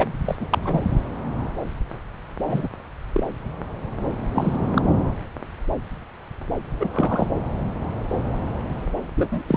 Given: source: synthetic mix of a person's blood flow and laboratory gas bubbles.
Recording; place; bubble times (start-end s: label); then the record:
Doppler ultrasound of blood flow; subclavian vein
0.00-0.12 s: bubbles
0.24-0.36 s: bubbles
0.40-0.46 s: bubbles
0.50-0.58 s: bubbles
0.62-0.84 s: bubbles
2.46-2.68 s: bubbles
3.13-3.23 s: bubbles
4.32-4.82 s: bubbles
6.79-6.89 s: bubbles
6.93-7.30 s: bubbles
9.16-9.43 s: bubbles
9.48-9.57 s: bubbles
From the record:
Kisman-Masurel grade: 222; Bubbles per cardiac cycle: several, 3 to 8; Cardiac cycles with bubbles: 10 to 50%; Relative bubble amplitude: moderate (0.250 to 0.450); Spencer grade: 2 (many but less than half of the cardiac periods contain bubble signals, singularly or in groups); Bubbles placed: anywhere in the cardiac cycle